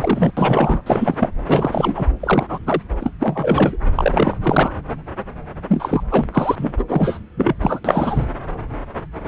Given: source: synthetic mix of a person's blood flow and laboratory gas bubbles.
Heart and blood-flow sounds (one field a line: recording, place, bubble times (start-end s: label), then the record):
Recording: Doppler ultrasound of blood flow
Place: subclavian vein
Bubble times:
0.00-0.31 s: bubbles
0.37-0.81 s: bubbles
0.86-1.16 s: bubbles
1.19-1.29 s: bubbles
1.47-2.09 s: bubbles
2.20-2.58 s: bubbles
2.66-2.82 s: bubbles
3.00-3.12 s: bubbles
3.19-3.78 s: bubbles
3.95-4.37 s: bubbles
4.42-4.72 s: bubbles
5.68-6.03 s: bubbles
6.11-6.26 s: bubbles
6.33-6.73 s: bubbles
6.79-6.84 s: bubbles
6.89-7.19 s: bubbles
7.37-7.54 s: bubbles
7.61-7.80 s: bubbles
7.84-8.26 s: bubbles
From the record:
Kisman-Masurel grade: 333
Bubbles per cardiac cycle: rolling drumbeat, 9 or more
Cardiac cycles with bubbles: 50 to 99%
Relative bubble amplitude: loud (0.450 to 0.775)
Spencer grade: 3 (all of the cardiac periods contain showers or single bubble signals, but not dominating or overriding the cardiac motion signals)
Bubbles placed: anywhere in the cardiac cycle